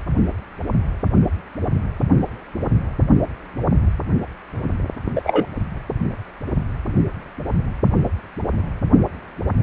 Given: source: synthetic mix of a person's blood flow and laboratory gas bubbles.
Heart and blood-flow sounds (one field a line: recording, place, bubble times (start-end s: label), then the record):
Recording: Doppler ultrasound of blood flow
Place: precordium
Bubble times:
5.16-5.46 s: bubbles
From the record:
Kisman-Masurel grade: 113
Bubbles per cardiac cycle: 1 to 2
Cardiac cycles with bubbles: 1 to 10%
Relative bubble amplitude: loud (0.450 to 0.775)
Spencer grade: 1 (occasional bubble signal discernible with the cardiac motion signal, with majority of cardiac periods free of bubbles)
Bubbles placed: anywhere in the cardiac cycle